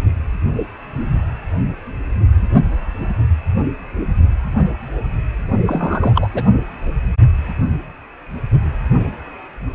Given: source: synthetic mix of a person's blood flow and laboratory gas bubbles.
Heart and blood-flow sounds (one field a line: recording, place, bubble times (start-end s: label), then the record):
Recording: Doppler ultrasound of blood flow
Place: precordium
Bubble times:
5.66-6.28 s: bubbles
6.33-6.42 s: bubbles
From the record:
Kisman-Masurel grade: 213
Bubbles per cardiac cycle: several, 3 to 8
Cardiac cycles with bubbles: 1 to 10%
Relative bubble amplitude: loud (0.450 to 0.775)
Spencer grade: 1 (occasional bubble signal discernible with the cardiac motion signal, with majority of cardiac periods free of bubbles)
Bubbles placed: only in the low amplitude regions of the cardiac cycle